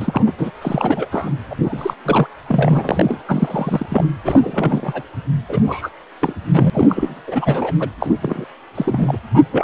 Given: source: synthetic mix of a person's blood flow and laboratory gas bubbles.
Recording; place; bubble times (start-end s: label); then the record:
Doppler ultrasound of blood flow; precordium
0.00-0.32 s: bubbles
0.38-0.51 s: bubbles
0.61-1.30 s: bubbles
1.50-1.55 s: bubbles
1.64-1.93 s: bubbles
2.04-2.27 s: bubbles
2.48-3.21 s: bubbles
3.28-3.85 s: bubbles
3.90-4.08 s: bubbles
4.23-5.02 s: bubbles
5.48-5.63 s: bubbles
5.66-5.89 s: bubbles
6.21-6.33 s: bubbles
6.54-6.70 s: bubbles
6.73-7.21 s: bubbles
7.27-7.73 s: bubbles
7.79-7.90 s: bubbles
8.00-8.16 s: bubbles
8.21-8.45 s: bubbles
8.75-9.18 s: bubbles
9.34-9.38 s: bubbles
9.52-9.64 s: bubbles
From the record:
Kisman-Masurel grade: 342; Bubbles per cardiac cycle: rolling drumbeat, 9 or more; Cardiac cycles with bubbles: 100%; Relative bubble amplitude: moderate (0.250 to 0.450); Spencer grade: 3 (all of the cardiac periods contain showers or single bubble signals, but not dominating or overriding the cardiac motion signals); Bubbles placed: anywhere in the cardiac cycle